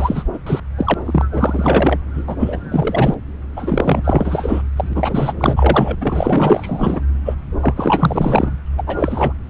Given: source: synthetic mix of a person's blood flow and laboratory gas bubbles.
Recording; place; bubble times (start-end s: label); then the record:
Doppler ultrasound of blood flow; subclavian vein
0.00-0.23 s: bubbles
0.33-0.39 s: bubbles
0.46-0.60 s: bubbles
0.77-0.94 s: bubbles
1.05-1.25 s: bubbles
1.31-1.98 s: bubbles
2.14-2.36 s: bubbles
2.39-3.17 s: bubbles
3.56-4.62 s: bubbles
4.76-5.34 s: bubbles
5.38-5.96 s: bubbles
6.00-7.02 s: bubbles
7.25-7.35 s: bubbles
7.61-8.51 s: bubbles
8.78-8.83 s: bubbles
8.87-9.34 s: bubbles
From the record:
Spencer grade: 4 (maximum detectable bubble signal sounding continuously throughout systole and diastole of every cardiac period, and overriding the amplitude of the normal cardiac signals); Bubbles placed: anywhere in the cardiac cycle